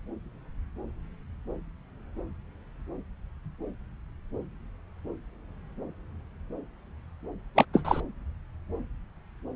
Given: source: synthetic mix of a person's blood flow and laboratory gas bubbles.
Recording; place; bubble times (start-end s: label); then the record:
Doppler ultrasound of blood flow; subclavian vein
7.55-7.65 s: bubbles
7.73-8.01 s: bubbles
From the record:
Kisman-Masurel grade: 212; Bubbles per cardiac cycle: several, 3 to 8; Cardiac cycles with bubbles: 1 to 10%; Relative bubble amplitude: moderate (0.250 to 0.450); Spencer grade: 1 (occasional bubble signal discernible with the cardiac motion signal, with majority of cardiac periods free of bubbles); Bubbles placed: anywhere in the cardiac cycle